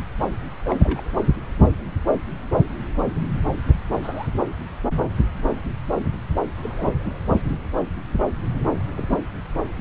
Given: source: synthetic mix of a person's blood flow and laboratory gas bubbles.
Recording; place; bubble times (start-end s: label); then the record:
Doppler ultrasound of blood flow; subclavian vein
0.66-1.01 s: bubbles
4.02-4.28 s: bubbles
6.56-6.90 s: bubbles
8.96-9.06 s: bubbles
9.10-9.19 s: bubbles
From the record:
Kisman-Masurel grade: 121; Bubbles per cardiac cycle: 1 to 2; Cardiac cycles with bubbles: 10 to 50%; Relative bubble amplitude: barely perceptible (0.100 to 0.250); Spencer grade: 2 (many but less than half of the cardiac periods contain bubble signals, singularly or in groups); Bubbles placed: anywhere in the cardiac cycle